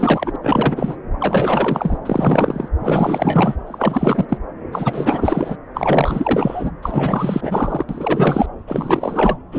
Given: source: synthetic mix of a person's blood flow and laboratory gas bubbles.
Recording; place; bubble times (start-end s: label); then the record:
Doppler ultrasound of blood flow; subclavian vein
0.00-0.36 s: bubbles
0.42-0.96 s: bubbles
1.20-1.98 s: bubbles
2.05-2.69 s: bubbles
2.79-3.56 s: bubbles
3.66-4.25 s: bubbles
4.28-4.38 s: bubbles
4.72-5.56 s: bubbles
5.74-6.71 s: bubbles
6.82-7.84 s: bubbles
7.89-8.46 s: bubbles
8.67-9.38 s: bubbles
9.52-9.59 s: bubbles
From the record:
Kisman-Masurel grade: 444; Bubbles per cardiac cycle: continuous sound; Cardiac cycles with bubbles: 100%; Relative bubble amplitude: maximal (0.775 to 0.999); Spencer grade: 4 (maximum detectable bubble signal sounding continuously throughout systole and diastole of every cardiac period, and overriding the amplitude of the normal cardiac signals); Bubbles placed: anywhere in the cardiac cycle